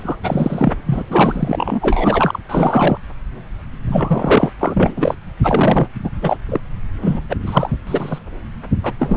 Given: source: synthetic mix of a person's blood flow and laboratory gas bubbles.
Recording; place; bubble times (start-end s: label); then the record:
Doppler ultrasound of blood flow; subclavian vein
0.00-0.16 s: bubbles
0.23-0.74 s: bubbles
0.85-1.04 s: bubbles
1.09-2.40 s: bubbles
2.48-2.97 s: bubbles
3.86-4.52 s: bubbles
4.60-5.14 s: bubbles
5.42-5.88 s: bubbles
6.04-6.10 s: bubbles
6.21-6.38 s: bubbles
6.48-6.60 s: bubbles
7.01-7.20 s: bubbles
7.29-7.36 s: bubbles
7.46-7.70 s: bubbles
7.87-8.19 s: bubbles
8.83-8.93 s: bubbles
8.99-9.17 s: bubbles
From the record:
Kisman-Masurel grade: 233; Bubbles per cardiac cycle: several, 3 to 8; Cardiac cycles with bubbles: 50 to 99%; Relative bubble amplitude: loud (0.450 to 0.775); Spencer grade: 3 (all of the cardiac periods contain showers or single bubble signals, but not dominating or overriding the cardiac motion signals); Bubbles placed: anywhere in the cardiac cycle